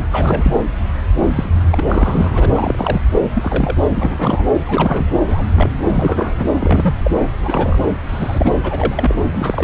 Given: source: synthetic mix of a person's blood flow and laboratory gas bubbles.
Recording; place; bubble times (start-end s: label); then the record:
Doppler ultrasound of blood flow; subclavian vein
0.00-0.05 s: bubbles
0.11-0.56 s: bubbles
1.35-1.50 s: bubbles
1.54-1.61 s: bubbles
1.71-1.82 s: bubbles
1.87-2.52 s: bubbles
2.54-3.01 s: bubbles
3.33-3.77 s: bubbles
3.95-4.46 s: bubbles
4.65-5.04 s: bubbles
5.26-5.43 s: bubbles
5.55-5.72 s: bubbles
5.87-6.51 s: bubbles
6.60-6.95 s: bubbles
7.04-7.11 s: bubbles
7.22-7.29 s: bubbles
7.42-7.79 s: bubbles
8.09-8.58 s: bubbles
8.63-9.20 s: bubbles
9.32-9.64 s: bubbles
From the record:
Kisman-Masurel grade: 242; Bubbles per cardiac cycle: several, 3 to 8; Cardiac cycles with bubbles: 100%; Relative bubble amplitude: moderate (0.250 to 0.450); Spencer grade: 3 (all of the cardiac periods contain showers or single bubble signals, but not dominating or overriding the cardiac motion signals); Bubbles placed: anywhere in the cardiac cycle